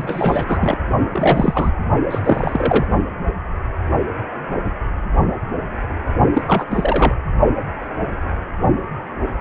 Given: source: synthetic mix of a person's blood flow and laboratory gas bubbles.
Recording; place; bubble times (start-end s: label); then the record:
Doppler ultrasound of blood flow; precordium
0.00-0.78 s: bubbles
1.11-1.73 s: bubbles
2.10-2.87 s: bubbles
6.33-6.42 s: bubbles
6.46-6.65 s: bubbles
6.71-7.15 s: bubbles
From the record:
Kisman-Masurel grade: 333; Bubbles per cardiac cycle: rolling drumbeat, 9 or more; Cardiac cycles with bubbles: 50 to 99%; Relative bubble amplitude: loud (0.450 to 0.775); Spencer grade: 3 (all of the cardiac periods contain showers or single bubble signals, but not dominating or overriding the cardiac motion signals); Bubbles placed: only in the low amplitude regions of the cardiac cycle